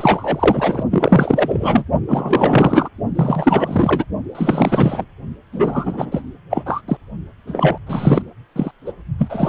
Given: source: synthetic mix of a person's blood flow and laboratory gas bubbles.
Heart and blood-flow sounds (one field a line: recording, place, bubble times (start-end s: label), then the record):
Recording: Doppler ultrasound of blood flow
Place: precordium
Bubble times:
0.00-0.83 s: bubbles
0.90-1.84 s: bubbles
2.08-2.89 s: bubbles
3.15-4.04 s: bubbles
4.34-5.05 s: bubbles
5.53-6.23 s: bubbles
6.50-6.82 s: bubbles
6.88-6.97 s: bubbles
7.47-7.78 s: bubbles
7.86-8.22 s: bubbles
8.55-8.71 s: bubbles
8.86-8.92 s: bubbles
9.18-9.49 s: bubbles
From the record:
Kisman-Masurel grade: 444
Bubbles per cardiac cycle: continuous sound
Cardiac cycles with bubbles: 100%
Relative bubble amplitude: maximal (0.775 to 0.999)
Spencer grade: 4 (maximum detectable bubble signal sounding continuously throughout systole and diastole of every cardiac period, and overriding the amplitude of the normal cardiac signals)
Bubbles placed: only in the low amplitude regions of the cardiac cycle